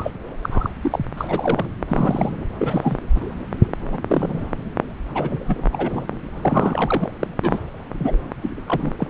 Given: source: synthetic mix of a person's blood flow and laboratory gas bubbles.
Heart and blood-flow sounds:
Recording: Doppler ultrasound of blood flow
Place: subclavian vein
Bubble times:
0.00-0.11 s: bubbles
0.43-0.69 s: bubbles
0.81-0.99 s: bubbles
1.17-1.70 s: bubbles
1.87-2.31 s: bubbles
2.58-2.98 s: bubbles
3.16-3.21 s: bubbles
3.61-3.67 s: bubbles
3.92-3.99 s: bubbles
4.08-4.46 s: bubbles
5.14-5.38 s: bubbles
5.46-5.69 s: bubbles
5.73-6.06 s: bubbles
6.42-7.13 s: bubbles
7.20-7.28 s: bubbles
7.44-7.59 s: bubbles
7.92-8.17 s: bubbles
8.42-8.50 s: bubbles
8.66-8.92 s: bubbles
8.98-9.07 s: bubbles
From the record:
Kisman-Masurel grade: 242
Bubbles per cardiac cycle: several, 3 to 8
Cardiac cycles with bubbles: 100%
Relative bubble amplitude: moderate (0.250 to 0.450)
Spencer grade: 3 (all of the cardiac periods contain showers or single bubble signals, but not dominating or overriding the cardiac motion signals)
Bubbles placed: anywhere in the cardiac cycle

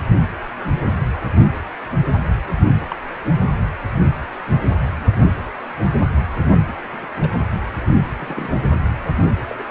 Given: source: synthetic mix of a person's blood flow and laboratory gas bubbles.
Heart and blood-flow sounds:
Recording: Doppler ultrasound of blood flow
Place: precordium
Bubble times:
2.81-2.86 s: bubbles
2.90-2.96 s: bubbles
6.93-7.07 s: bubbles
7.17-7.30 s: bubbles
8.20-8.49 s: bubbles
9.49-9.62 s: bubbles
From the record:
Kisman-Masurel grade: 121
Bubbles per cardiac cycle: 1 to 2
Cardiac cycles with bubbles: 10 to 50%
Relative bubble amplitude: barely perceptible (0.100 to 0.250)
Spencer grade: 2 (many but less than half of the cardiac periods contain bubble signals, singularly or in groups)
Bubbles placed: anywhere in the cardiac cycle

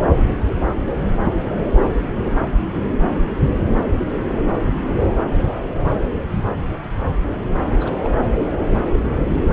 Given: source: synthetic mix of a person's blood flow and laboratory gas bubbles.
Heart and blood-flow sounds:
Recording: Doppler ultrasound of blood flow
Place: subclavian vein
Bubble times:
7.80-7.92 s: bubbles
8.04-8.16 s: bubbles
From the record:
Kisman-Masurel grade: 211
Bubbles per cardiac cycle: several, 3 to 8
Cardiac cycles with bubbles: 1 to 10%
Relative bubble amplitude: barely perceptible (0.100 to 0.250)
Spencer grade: 1 (occasional bubble signal discernible with the cardiac motion signal, with majority of cardiac periods free of bubbles)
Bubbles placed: anywhere in the cardiac cycle

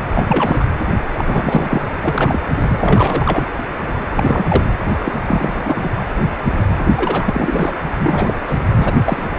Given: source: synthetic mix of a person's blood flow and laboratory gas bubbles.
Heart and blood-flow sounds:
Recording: Doppler ultrasound of blood flow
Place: precordium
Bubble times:
0.14-0.25 s: bubbles
0.28-0.64 s: bubbles
1.17-1.82 s: bubbles
2.03-2.40 s: bubbles
2.67-3.46 s: bubbles
4.12-4.63 s: bubbles
5.05-5.13 s: bubbles
5.26-5.54 s: bubbles
5.64-5.91 s: bubbles
6.96-7.72 s: bubbles
7.98-8.34 s: bubbles
8.47-8.58 s: bubbles
8.68-8.94 s: bubbles
9.06-9.23 s: bubbles
9.36-9.39 s: bubbles
From the record:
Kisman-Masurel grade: 333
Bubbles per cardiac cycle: rolling drumbeat, 9 or more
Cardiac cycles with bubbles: 50 to 99%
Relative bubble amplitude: loud (0.450 to 0.775)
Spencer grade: 3 (all of the cardiac periods contain showers or single bubble signals, but not dominating or overriding the cardiac motion signals)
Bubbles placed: anywhere in the cardiac cycle

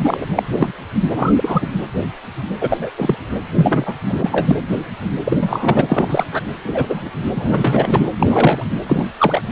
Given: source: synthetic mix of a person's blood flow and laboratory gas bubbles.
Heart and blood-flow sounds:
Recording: Doppler ultrasound of blood flow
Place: precordium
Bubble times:
0.00-0.26 s: bubbles
0.35-0.43 s: bubbles
0.52-0.73 s: bubbles
1.15-1.33 s: bubbles
1.36-1.67 s: bubbles
2.60-2.91 s: bubbles
2.98-3.15 s: bubbles
3.54-3.95 s: bubbles
4.08-4.57 s: bubbles
5.25-6.24 s: bubbles
6.32-6.42 s: bubbles
6.64-7.10 s: bubbles
7.36-8.09 s: bubbles
8.19-8.63 s: bubbles
8.86-9.08 s: bubbles
9.18-9.48 s: bubbles
From the record:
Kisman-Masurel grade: 233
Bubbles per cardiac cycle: several, 3 to 8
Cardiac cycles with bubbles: 50 to 99%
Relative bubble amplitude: loud (0.450 to 0.775)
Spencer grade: 3 (all of the cardiac periods contain showers or single bubble signals, but not dominating or overriding the cardiac motion signals)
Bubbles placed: anywhere in the cardiac cycle

